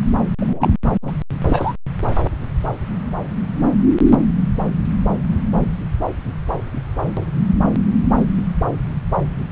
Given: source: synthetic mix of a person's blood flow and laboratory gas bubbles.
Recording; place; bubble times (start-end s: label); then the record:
Doppler ultrasound of blood flow; subclavian vein
0.41-0.73 s: bubbles
1.02-1.11 s: bubbles
1.45-1.73 s: bubbles
From the record:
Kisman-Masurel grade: 212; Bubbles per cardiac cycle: several, 3 to 8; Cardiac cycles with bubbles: 1 to 10%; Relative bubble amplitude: moderate (0.250 to 0.450); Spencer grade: 1 (occasional bubble signal discernible with the cardiac motion signal, with majority of cardiac periods free of bubbles); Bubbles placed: anywhere in the cardiac cycle